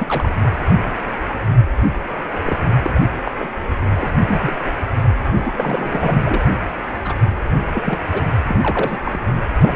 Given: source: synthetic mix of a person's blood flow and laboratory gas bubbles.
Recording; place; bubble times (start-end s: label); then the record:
Doppler ultrasound of blood flow; precordium
0.00-0.29 s: bubbles
1.21-1.36 s: bubbles
2.45-2.56 s: bubbles
2.84-2.99 s: bubbles
3.25-3.31 s: bubbles
3.38-3.48 s: bubbles
3.94-4.06 s: bubbles
4.28-4.56 s: bubbles
4.66-4.71 s: bubbles
5.26-6.21 s: bubbles
6.26-6.52 s: bubbles
7.04-7.13 s: bubbles
7.74-7.81 s: bubbles
7.84-7.99 s: bubbles
8.12-8.22 s: bubbles
8.48-8.55 s: bubbles
8.62-8.98 s: bubbles
9.04-9.19 s: bubbles
9.62-9.73 s: bubbles
From the record:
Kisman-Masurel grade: 242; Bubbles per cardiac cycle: several, 3 to 8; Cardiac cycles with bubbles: 100%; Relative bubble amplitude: moderate (0.250 to 0.450); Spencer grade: 3 (all of the cardiac periods contain showers or single bubble signals, but not dominating or overriding the cardiac motion signals); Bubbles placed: anywhere in the cardiac cycle